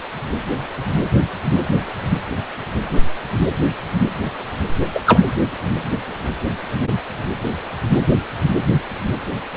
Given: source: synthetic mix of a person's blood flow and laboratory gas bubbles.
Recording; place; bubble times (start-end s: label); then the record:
Doppler ultrasound of blood flow; precordium
4.94-5.00 s: bubbles
5.06-5.21 s: bubbles
From the record:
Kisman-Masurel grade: 113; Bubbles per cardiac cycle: 1 to 2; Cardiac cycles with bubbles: 1 to 10%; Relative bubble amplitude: loud (0.450 to 0.775); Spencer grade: 1 (occasional bubble signal discernible with the cardiac motion signal, with majority of cardiac periods free of bubbles); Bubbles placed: anywhere in the cardiac cycle